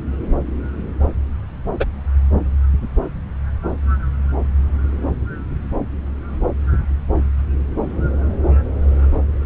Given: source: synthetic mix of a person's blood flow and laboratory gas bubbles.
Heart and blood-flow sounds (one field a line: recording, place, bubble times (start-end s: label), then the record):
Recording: Doppler ultrasound of blood flow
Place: subclavian vein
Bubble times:
1.79-1.84 s: bubbles
From the record:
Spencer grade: 1 (occasional bubble signal discernible with the cardiac motion signal, with majority of cardiac periods free of bubbles)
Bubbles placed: anywhere in the cardiac cycle